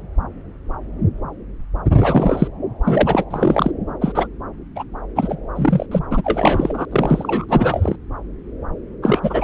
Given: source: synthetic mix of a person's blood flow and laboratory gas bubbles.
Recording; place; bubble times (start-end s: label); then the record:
Doppler ultrasound of blood flow; subclavian vein
2.00-2.48 s: bubbles
2.84-3.25 s: bubbles
3.30-3.71 s: bubbles
4.01-4.28 s: bubbles
4.75-4.83 s: bubbles
5.15-5.35 s: bubbles
5.55-5.86 s: bubbles
5.91-5.99 s: bubbles
6.11-6.86 s: bubbles
6.91-7.46 s: bubbles
7.49-7.96 s: bubbles
9.02-9.20 s: bubbles
9.23-9.44 s: bubbles
From the record:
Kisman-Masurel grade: 333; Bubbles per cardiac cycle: rolling drumbeat, 9 or more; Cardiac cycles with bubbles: 50 to 99%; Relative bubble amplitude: loud (0.450 to 0.775); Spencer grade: 3 (all of the cardiac periods contain showers or single bubble signals, but not dominating or overriding the cardiac motion signals); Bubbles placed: anywhere in the cardiac cycle